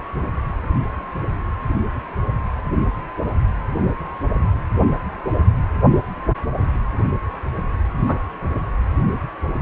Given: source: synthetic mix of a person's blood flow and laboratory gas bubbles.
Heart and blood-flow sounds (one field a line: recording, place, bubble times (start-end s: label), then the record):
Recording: Doppler ultrasound of blood flow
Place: precordium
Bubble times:
8.01-8.18 s: bubbles
From the record:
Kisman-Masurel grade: 112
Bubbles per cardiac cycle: 1 to 2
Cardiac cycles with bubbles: 1 to 10%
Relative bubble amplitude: moderate (0.250 to 0.450)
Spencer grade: 1 (occasional bubble signal discernible with the cardiac motion signal, with majority of cardiac periods free of bubbles)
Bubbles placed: anywhere in the cardiac cycle